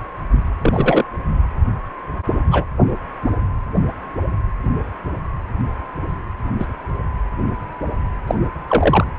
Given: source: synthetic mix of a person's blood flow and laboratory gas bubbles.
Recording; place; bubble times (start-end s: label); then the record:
Doppler ultrasound of blood flow; precordium
0.61-1.04 s: bubbles
2.51-2.65 s: bubbles
6.59-6.67 s: bubbles
8.27-8.35 s: bubbles
8.68-9.05 s: bubbles
From the record:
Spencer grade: 2 (many but less than half of the cardiac periods contain bubble signals, singularly or in groups); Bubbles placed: anywhere in the cardiac cycle